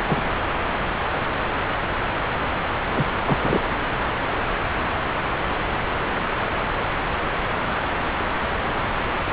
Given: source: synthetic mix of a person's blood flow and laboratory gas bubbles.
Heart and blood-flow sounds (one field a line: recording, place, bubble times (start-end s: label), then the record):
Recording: Doppler ultrasound of blood flow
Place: subclavian vein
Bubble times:
0.07-0.23 s: bubbles
2.95-3.05 s: bubbles
3.25-3.38 s: bubbles
3.40-3.62 s: bubbles
From the record:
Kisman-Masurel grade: 222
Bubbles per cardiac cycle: several, 3 to 8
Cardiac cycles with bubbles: 10 to 50%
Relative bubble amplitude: moderate (0.250 to 0.450)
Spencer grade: 2 (many but less than half of the cardiac periods contain bubble signals, singularly or in groups)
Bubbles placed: anywhere in the cardiac cycle